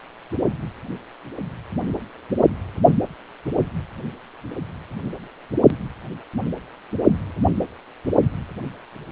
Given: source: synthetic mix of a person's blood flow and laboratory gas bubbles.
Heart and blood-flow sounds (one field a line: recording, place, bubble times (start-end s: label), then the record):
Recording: Doppler ultrasound of blood flow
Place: precordium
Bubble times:
no bubbles
From the record:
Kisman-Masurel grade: 000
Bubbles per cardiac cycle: 0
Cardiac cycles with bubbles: 0%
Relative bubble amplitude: no bubbles discernible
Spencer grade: 0 (complete lack of bubble signals)